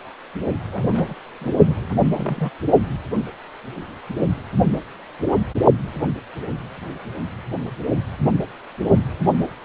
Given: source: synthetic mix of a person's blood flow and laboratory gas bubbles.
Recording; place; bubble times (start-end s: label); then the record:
Doppler ultrasound of blood flow; precordium
0.72-1.15 s: bubbles
1.41-1.53 s: bubbles
1.64-1.94 s: bubbles
2.12-2.50 s: bubbles
From the record:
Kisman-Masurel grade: 221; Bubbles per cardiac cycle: several, 3 to 8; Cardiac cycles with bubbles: 10 to 50%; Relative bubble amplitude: barely perceptible (0.100 to 0.250); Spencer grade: 2 (many but less than half of the cardiac periods contain bubble signals, singularly or in groups); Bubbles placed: only in the low amplitude regions of the cardiac cycle